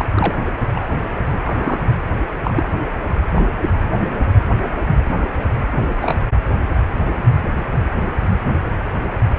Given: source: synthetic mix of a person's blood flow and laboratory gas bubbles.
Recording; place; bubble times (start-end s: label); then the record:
Doppler ultrasound of blood flow; precordium
0.00-0.05 s: bubbles
0.14-0.35 s: bubbles
0.74-0.90 s: bubbles
1.45-1.79 s: bubbles
2.44-2.67 s: bubbles
3.35-3.43 s: bubbles
6.01-6.18 s: bubbles
From the record:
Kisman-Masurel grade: 122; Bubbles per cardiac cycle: 1 to 2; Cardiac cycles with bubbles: 10 to 50%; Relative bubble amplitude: moderate (0.250 to 0.450); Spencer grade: 2 (many but less than half of the cardiac periods contain bubble signals, singularly or in groups); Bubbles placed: only in the low amplitude regions of the cardiac cycle